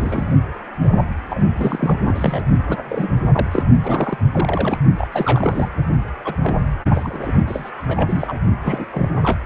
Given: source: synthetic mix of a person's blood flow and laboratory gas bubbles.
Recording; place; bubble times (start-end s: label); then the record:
Doppler ultrasound of blood flow; precordium
0.00-0.33 s: bubbles
0.82-1.02 s: bubbles
1.29-1.42 s: bubbles
1.56-2.40 s: bubbles
2.67-2.77 s: bubbles
2.89-3.09 s: bubbles
3.32-3.48 s: bubbles
3.51-3.63 s: bubbles
3.83-4.18 s: bubbles
4.32-4.78 s: bubbles
4.98-5.08 s: bubbles
5.12-5.69 s: bubbles
6.25-6.36 s: bubbles
6.43-6.55 s: bubbles
6.95-7.32 s: bubbles
7.47-7.71 s: bubbles
7.88-8.37 s: bubbles
8.62-8.86 s: bubbles
8.90-9.10 s: bubbles
9.22-9.38 s: bubbles
From the record:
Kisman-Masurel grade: 342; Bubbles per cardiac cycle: rolling drumbeat, 9 or more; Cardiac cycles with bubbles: 100%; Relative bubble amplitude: moderate (0.250 to 0.450); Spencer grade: 3 (all of the cardiac periods contain showers or single bubble signals, but not dominating or overriding the cardiac motion signals); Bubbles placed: only in the low amplitude regions of the cardiac cycle